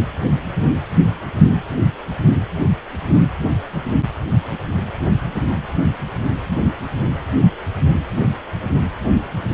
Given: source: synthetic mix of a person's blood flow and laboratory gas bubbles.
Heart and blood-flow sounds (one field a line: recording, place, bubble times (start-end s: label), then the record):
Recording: Doppler ultrasound of blood flow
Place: precordium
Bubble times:
no bubbles
From the record:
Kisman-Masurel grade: 000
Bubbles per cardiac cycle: 0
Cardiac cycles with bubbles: 0%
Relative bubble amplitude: no bubbles discernible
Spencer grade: 0 (complete lack of bubble signals)